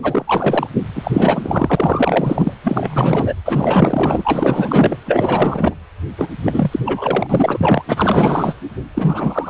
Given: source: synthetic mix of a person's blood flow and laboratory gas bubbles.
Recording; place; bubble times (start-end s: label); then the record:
Doppler ultrasound of blood flow; precordium
0.02-0.67 s: bubbles
0.95-2.54 s: bubbles
2.63-3.34 s: bubbles
3.46-4.96 s: bubbles
5.05-5.75 s: bubbles
6.17-6.28 s: bubbles
6.46-6.79 s: bubbles
6.84-7.26 s: bubbles
7.29-7.82 s: bubbles
7.88-8.54 s: bubbles
8.95-9.49 s: bubbles
From the record:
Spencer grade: 4 (maximum detectable bubble signal sounding continuously throughout systole and diastole of every cardiac period, and overriding the amplitude of the normal cardiac signals); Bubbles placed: anywhere in the cardiac cycle